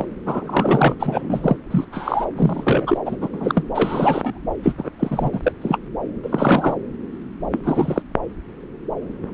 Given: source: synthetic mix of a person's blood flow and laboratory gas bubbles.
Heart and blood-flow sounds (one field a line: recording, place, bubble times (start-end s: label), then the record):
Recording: Doppler ultrasound of blood flow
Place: subclavian vein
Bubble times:
0.00-0.06 s: bubbles
0.26-0.95 s: bubbles
1.00-1.56 s: bubbles
1.71-1.85 s: bubbles
1.92-2.25 s: bubbles
2.37-2.98 s: bubbles
3.06-3.17 s: bubbles
3.21-3.29 s: bubbles
3.33-3.64 s: bubbles
3.74-4.38 s: bubbles
4.63-4.90 s: bubbles
4.99-5.30 s: bubbles
5.33-5.39 s: bubbles
5.43-5.53 s: bubbles
5.62-5.78 s: bubbles
6.23-6.74 s: bubbles
7.52-7.60 s: bubbles
7.63-8.02 s: bubbles
From the record:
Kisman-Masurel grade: 232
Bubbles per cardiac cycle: several, 3 to 8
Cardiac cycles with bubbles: 50 to 99%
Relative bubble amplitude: moderate (0.250 to 0.450)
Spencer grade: 3 (all of the cardiac periods contain showers or single bubble signals, but not dominating or overriding the cardiac motion signals)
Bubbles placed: anywhere in the cardiac cycle